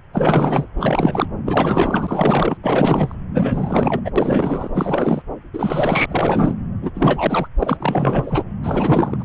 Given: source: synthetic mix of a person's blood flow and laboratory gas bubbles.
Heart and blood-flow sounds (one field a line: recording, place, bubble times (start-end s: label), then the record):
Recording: Doppler ultrasound of blood flow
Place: subclavian vein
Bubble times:
0.13-0.67 s: bubbles
0.77-1.27 s: bubbles
1.46-2.57 s: bubbles
2.63-3.15 s: bubbles
3.33-4.00 s: bubbles
4.04-4.10 s: bubbles
4.16-4.71 s: bubbles
4.74-5.22 s: bubbles
5.53-6.06 s: bubbles
6.08-6.54 s: bubbles
6.82-6.91 s: bubbles
6.95-7.48 s: bubbles
7.59-8.44 s: bubbles
8.62-9.23 s: bubbles
From the record:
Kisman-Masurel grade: 444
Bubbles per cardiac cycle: continuous sound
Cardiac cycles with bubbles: 100%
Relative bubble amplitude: maximal (0.775 to 0.999)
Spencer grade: 4 (maximum detectable bubble signal sounding continuously throughout systole and diastole of every cardiac period, and overriding the amplitude of the normal cardiac signals)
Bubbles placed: anywhere in the cardiac cycle